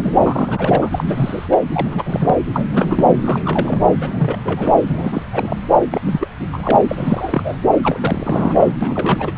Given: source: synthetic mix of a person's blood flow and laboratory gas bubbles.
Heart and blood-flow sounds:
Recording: Doppler ultrasound of blood flow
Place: subclavian vein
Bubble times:
0.00-0.15 s: bubbles
0.26-0.89 s: bubbles
0.92-1.04 s: bubbles
1.07-1.47 s: bubbles
1.51-1.57 s: bubbles
1.73-2.35 s: bubbles
2.52-2.66 s: bubbles
2.72-3.15 s: bubbles
3.24-3.80 s: bubbles
4.00-4.78 s: bubbles
4.81-5.23 s: bubbles
5.31-5.57 s: bubbles
5.92-6.01 s: bubbles
6.06-6.28 s: bubbles
6.40-6.46 s: bubbles
6.52-6.76 s: bubbles
6.88-7.58 s: bubbles
7.83-8.74 s: bubbles
8.80-9.32 s: bubbles
From the record:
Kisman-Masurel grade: 342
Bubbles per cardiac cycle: rolling drumbeat, 9 or more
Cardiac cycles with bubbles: 100%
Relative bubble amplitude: moderate (0.250 to 0.450)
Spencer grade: 3 (all of the cardiac periods contain showers or single bubble signals, but not dominating or overriding the cardiac motion signals)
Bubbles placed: anywhere in the cardiac cycle

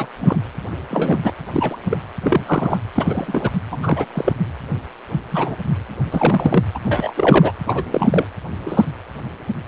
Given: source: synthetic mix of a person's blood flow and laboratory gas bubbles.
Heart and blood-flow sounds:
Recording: Doppler ultrasound of blood flow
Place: precordium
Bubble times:
0.00-0.07 s: bubbles
0.20-0.36 s: bubbles
0.90-1.18 s: bubbles
1.24-1.33 s: bubbles
1.52-1.76 s: bubbles
1.90-1.97 s: bubbles
2.23-2.40 s: bubbles
2.45-2.77 s: bubbles
2.95-3.50 s: bubbles
3.71-4.05 s: bubbles
4.15-4.33 s: bubbles
5.32-5.56 s: bubbles
6.12-6.64 s: bubbles
6.75-6.79 s: bubbles
6.83-7.54 s: bubbles
7.66-8.27 s: bubbles
8.66-8.84 s: bubbles
From the record:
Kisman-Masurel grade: 243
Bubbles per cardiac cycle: several, 3 to 8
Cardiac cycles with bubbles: 100%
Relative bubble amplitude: loud (0.450 to 0.775)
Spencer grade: 3 (all of the cardiac periods contain showers or single bubble signals, but not dominating or overriding the cardiac motion signals)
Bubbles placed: anywhere in the cardiac cycle

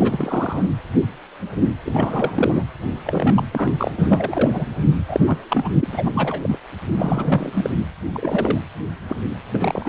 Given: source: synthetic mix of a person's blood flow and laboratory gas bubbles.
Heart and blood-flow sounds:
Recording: Doppler ultrasound of blood flow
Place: precordium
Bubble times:
0.00-0.62 s: bubbles
1.84-2.64 s: bubbles
3.04-3.44 s: bubbles
3.52-3.73 s: bubbles
3.77-3.93 s: bubbles
3.97-4.66 s: bubbles
5.08-5.20 s: bubbles
5.27-5.38 s: bubbles
5.49-5.72 s: bubbles
5.80-5.88 s: bubbles
5.92-6.58 s: bubbles
6.97-7.70 s: bubbles
7.76-7.85 s: bubbles
8.10-8.61 s: bubbles
9.08-9.22 s: bubbles
9.52-9.89 s: bubbles
From the record:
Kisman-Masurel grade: 332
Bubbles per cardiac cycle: rolling drumbeat, 9 or more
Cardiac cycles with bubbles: 50 to 99%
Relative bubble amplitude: moderate (0.250 to 0.450)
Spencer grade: 3 (all of the cardiac periods contain showers or single bubble signals, but not dominating or overriding the cardiac motion signals)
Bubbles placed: anywhere in the cardiac cycle

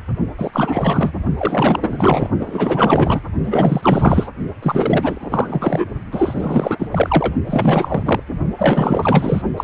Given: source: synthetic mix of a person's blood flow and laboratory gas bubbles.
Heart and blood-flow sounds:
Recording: Doppler ultrasound of blood flow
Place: precordium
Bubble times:
0.37-1.12 s: bubbles
1.38-2.29 s: bubbles
2.40-3.21 s: bubbles
3.44-4.29 s: bubbles
4.62-5.85 s: bubbles
6.11-6.88 s: bubbles
6.91-7.34 s: bubbles
7.46-8.03 s: bubbles
8.05-8.20 s: bubbles
8.57-9.42 s: bubbles
9.56-9.64 s: bubbles
From the record:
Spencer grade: 4 (maximum detectable bubble signal sounding continuously throughout systole and diastole of every cardiac period, and overriding the amplitude of the normal cardiac signals)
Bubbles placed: only in the low amplitude regions of the cardiac cycle

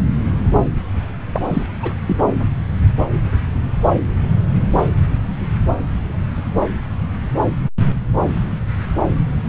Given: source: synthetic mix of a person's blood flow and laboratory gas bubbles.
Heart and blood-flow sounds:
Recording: Doppler ultrasound of blood flow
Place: subclavian vein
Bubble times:
1.34-1.42 s: bubbles
1.50-1.66 s: bubbles
1.80-1.94 s: bubbles
2.06-2.16 s: bubbles
From the record:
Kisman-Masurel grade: 212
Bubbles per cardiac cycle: several, 3 to 8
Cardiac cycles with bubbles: 1 to 10%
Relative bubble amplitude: moderate (0.250 to 0.450)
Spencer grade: 1 (occasional bubble signal discernible with the cardiac motion signal, with majority of cardiac periods free of bubbles)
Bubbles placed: anywhere in the cardiac cycle

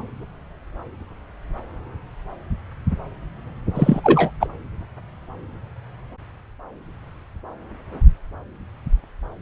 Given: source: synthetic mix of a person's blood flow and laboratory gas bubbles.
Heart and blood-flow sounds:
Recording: Doppler ultrasound of blood flow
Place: subclavian vein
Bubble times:
3.74-4.01 s: bubbles
4.04-4.31 s: bubbles
4.40-4.47 s: bubbles
From the record:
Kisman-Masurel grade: 213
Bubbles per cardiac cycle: several, 3 to 8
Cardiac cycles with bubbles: 1 to 10%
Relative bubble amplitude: loud (0.450 to 0.775)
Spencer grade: 1 (occasional bubble signal discernible with the cardiac motion signal, with majority of cardiac periods free of bubbles)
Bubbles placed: anywhere in the cardiac cycle

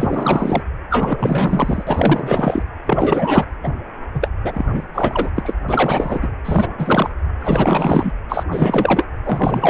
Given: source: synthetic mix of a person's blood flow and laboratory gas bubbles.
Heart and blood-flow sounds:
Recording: Doppler ultrasound of blood flow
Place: precordium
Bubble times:
0.00-0.62 s: bubbles
0.90-2.64 s: bubbles
2.86-3.45 s: bubbles
3.63-3.75 s: bubbles
4.14-4.29 s: bubbles
4.43-4.87 s: bubbles
4.94-5.31 s: bubbles
5.35-5.53 s: bubbles
5.68-6.28 s: bubbles
6.44-7.10 s: bubbles
7.39-8.12 s: bubbles
8.29-8.44 s: bubbles
8.52-9.07 s: bubbles
9.24-9.70 s: bubbles
From the record:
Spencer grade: 4 (maximum detectable bubble signal sounding continuously throughout systole and diastole of every cardiac period, and overriding the amplitude of the normal cardiac signals)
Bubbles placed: anywhere in the cardiac cycle

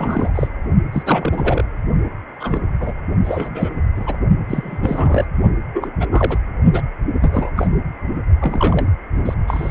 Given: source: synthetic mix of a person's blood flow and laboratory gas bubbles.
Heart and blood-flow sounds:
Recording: Doppler ultrasound of blood flow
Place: precordium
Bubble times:
0.00-0.31 s: bubbles
0.34-0.49 s: bubbles
0.93-1.03 s: bubbles
1.05-1.65 s: bubbles
2.40-2.61 s: bubbles
2.79-2.93 s: bubbles
3.24-3.71 s: bubbles
3.96-4.18 s: bubbles
4.47-5.25 s: bubbles
5.73-5.93 s: bubbles
6.00-6.07 s: bubbles
6.11-6.38 s: bubbles
6.73-6.81 s: bubbles
7.21-7.50 s: bubbles
7.56-7.67 s: bubbles
8.40-8.90 s: bubbles
9.25-9.34 s: bubbles
9.47-9.71 s: bubbles
From the record:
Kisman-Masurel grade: 242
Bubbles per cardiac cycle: several, 3 to 8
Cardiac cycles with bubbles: 100%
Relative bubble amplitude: moderate (0.250 to 0.450)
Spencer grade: 3 (all of the cardiac periods contain showers or single bubble signals, but not dominating or overriding the cardiac motion signals)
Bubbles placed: only in the low amplitude regions of the cardiac cycle

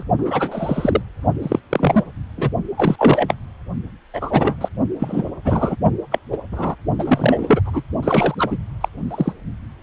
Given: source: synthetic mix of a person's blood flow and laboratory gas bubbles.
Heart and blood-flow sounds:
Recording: Doppler ultrasound of blood flow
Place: precordium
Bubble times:
0.00-0.03 s: bubbles
0.18-1.02 s: bubbles
1.42-1.60 s: bubbles
1.70-2.04 s: bubbles
2.38-2.50 s: bubbles
2.77-3.35 s: bubbles
4.13-4.69 s: bubbles
4.99-5.32 s: bubbles
5.45-5.76 s: bubbles
6.11-6.19 s: bubbles
6.32-6.37 s: bubbles
6.51-6.75 s: bubbles
6.99-7.61 s: bubbles
7.65-7.83 s: bubbles
8.02-8.35 s: bubbles
8.38-8.58 s: bubbles
8.80-8.88 s: bubbles
9.10-9.32 s: bubbles
From the record:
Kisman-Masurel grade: 233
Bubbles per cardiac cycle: several, 3 to 8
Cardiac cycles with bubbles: 50 to 99%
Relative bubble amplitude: loud (0.450 to 0.775)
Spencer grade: 3 (all of the cardiac periods contain showers or single bubble signals, but not dominating or overriding the cardiac motion signals)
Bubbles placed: only in the low amplitude regions of the cardiac cycle

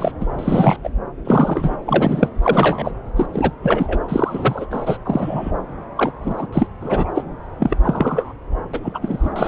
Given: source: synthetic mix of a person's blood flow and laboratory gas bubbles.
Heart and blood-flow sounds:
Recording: Doppler ultrasound of blood flow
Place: subclavian vein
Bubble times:
0.00-0.12 s: bubbles
0.20-0.26 s: bubbles
0.39-0.78 s: bubbles
0.83-0.89 s: bubbles
1.24-1.77 s: bubbles
1.85-2.29 s: bubbles
2.42-2.92 s: bubbles
3.16-3.26 s: bubbles
3.33-3.52 s: bubbles
3.62-3.99 s: bubbles
4.08-4.67 s: bubbles
4.70-4.97 s: bubbles
5.05-5.51 s: bubbles
5.97-6.12 s: bubbles
6.20-6.47 s: bubbles
6.52-6.67 s: bubbles
6.80-7.11 s: bubbles
7.14-7.23 s: bubbles
7.58-7.77 s: bubbles
7.83-8.33 s: bubbles
8.73-8.79 s: bubbles
8.82-8.99 s: bubbles
9.01-9.30 s: bubbles
9.36-9.48 s: bubbles
From the record:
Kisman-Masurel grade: 243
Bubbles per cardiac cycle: several, 3 to 8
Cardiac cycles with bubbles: 100%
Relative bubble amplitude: loud (0.450 to 0.775)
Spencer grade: 3 (all of the cardiac periods contain showers or single bubble signals, but not dominating or overriding the cardiac motion signals)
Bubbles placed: anywhere in the cardiac cycle

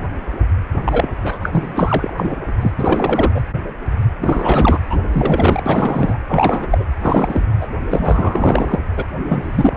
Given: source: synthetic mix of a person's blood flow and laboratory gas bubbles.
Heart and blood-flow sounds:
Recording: Doppler ultrasound of blood flow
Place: precordium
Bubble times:
0.84-1.09 s: bubbles
1.24-1.73 s: bubbles
1.75-2.13 s: bubbles
2.17-2.35 s: bubbles
2.60-2.74 s: bubbles
2.77-3.31 s: bubbles
3.34-3.42 s: bubbles
4.21-4.79 s: bubbles
4.89-5.00 s: bubbles
5.12-5.63 s: bubbles
5.66-6.19 s: bubbles
6.28-6.67 s: bubbles
6.71-6.84 s: bubbles
7.00-7.47 s: bubbles
7.60-7.67 s: bubbles
7.90-8.79 s: bubbles
8.96-9.05 s: bubbles
9.27-9.76 s: bubbles
From the record:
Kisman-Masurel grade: 333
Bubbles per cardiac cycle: rolling drumbeat, 9 or more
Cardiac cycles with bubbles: 50 to 99%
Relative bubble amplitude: loud (0.450 to 0.775)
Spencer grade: 3 (all of the cardiac periods contain showers or single bubble signals, but not dominating or overriding the cardiac motion signals)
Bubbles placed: anywhere in the cardiac cycle

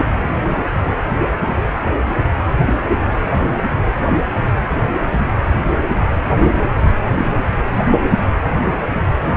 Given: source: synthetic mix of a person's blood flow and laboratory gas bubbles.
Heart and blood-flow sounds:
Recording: Doppler ultrasound of blood flow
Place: precordium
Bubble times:
0.00-0.05 s: bubbles
From the record:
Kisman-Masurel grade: 112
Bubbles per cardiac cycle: 1 to 2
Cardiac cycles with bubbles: 1 to 10%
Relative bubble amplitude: moderate (0.250 to 0.450)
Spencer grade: 1 (occasional bubble signal discernible with the cardiac motion signal, with majority of cardiac periods free of bubbles)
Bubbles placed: anywhere in the cardiac cycle

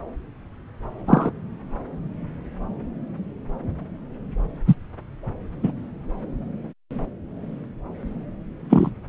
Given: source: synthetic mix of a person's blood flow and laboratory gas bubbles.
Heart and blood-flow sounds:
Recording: Doppler ultrasound of blood flow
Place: subclavian vein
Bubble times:
1.07-1.31 s: bubbles
4.68-4.75 s: bubbles
5.62-5.72 s: bubbles
8.69-8.90 s: bubbles
From the record:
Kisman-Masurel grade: 123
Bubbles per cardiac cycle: 1 to 2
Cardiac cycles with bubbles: 10 to 50%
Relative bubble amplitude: loud (0.450 to 0.775)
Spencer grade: 2 (many but less than half of the cardiac periods contain bubble signals, singularly or in groups)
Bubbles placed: anywhere in the cardiac cycle

